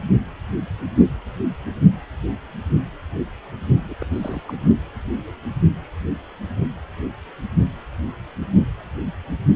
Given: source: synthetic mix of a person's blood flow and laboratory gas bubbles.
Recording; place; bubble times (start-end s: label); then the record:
Doppler ultrasound of blood flow; precordium
3.85-3.94 s: bubbles
3.98-4.07 s: bubbles
4.12-4.42 s: bubbles
4.46-4.56 s: bubbles
From the record:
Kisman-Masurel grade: 221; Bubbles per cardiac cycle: several, 3 to 8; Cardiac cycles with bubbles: 10 to 50%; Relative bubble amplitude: barely perceptible (0.100 to 0.250); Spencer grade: 2 (many but less than half of the cardiac periods contain bubble signals, singularly or in groups); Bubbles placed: only in the low amplitude regions of the cardiac cycle